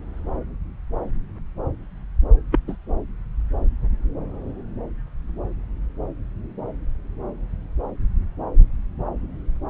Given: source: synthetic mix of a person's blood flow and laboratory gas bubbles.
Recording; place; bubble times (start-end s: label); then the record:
Doppler ultrasound of blood flow; subclavian vein
2.51-2.59 s: bubbles
2.67-2.75 s: bubbles
From the record:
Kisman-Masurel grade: 112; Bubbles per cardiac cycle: 1 to 2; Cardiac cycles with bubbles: 1 to 10%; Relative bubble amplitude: moderate (0.250 to 0.450); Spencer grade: 1 (occasional bubble signal discernible with the cardiac motion signal, with majority of cardiac periods free of bubbles); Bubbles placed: anywhere in the cardiac cycle